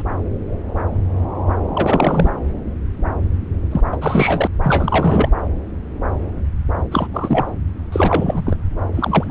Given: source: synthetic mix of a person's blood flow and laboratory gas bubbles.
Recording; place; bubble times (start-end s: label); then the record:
Doppler ultrasound of blood flow; subclavian vein
0.00-0.02 s: bubbles
1.73-2.30 s: bubbles
3.71-3.81 s: bubbles
3.92-3.97 s: bubbles
4.01-4.47 s: bubbles
4.63-5.29 s: bubbles
6.91-7.07 s: bubbles
7.13-7.47 s: bubbles
7.92-8.56 s: bubbles
8.93-9.30 s: bubbles
From the record:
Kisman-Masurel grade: 332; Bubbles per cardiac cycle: rolling drumbeat, 9 or more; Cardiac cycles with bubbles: 50 to 99%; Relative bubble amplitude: moderate (0.250 to 0.450); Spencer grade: 3 (all of the cardiac periods contain showers or single bubble signals, but not dominating or overriding the cardiac motion signals); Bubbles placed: anywhere in the cardiac cycle